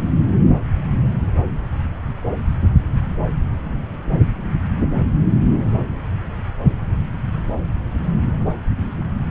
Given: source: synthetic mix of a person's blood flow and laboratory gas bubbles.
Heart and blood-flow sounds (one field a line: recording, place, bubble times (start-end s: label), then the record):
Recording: Doppler ultrasound of blood flow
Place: subclavian vein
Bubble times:
no bubbles
From the record:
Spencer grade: 0 (complete lack of bubble signals)